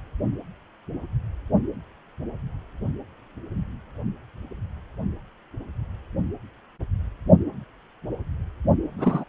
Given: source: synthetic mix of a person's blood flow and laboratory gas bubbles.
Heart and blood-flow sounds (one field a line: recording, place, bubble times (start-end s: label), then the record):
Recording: Doppler ultrasound of blood flow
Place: precordium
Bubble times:
8.98-9.24 s: bubbles
From the record:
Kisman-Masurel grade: 222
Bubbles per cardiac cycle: several, 3 to 8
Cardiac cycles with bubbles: 10 to 50%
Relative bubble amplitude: moderate (0.250 to 0.450)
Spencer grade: 2 (many but less than half of the cardiac periods contain bubble signals, singularly or in groups)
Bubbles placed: only in the low amplitude regions of the cardiac cycle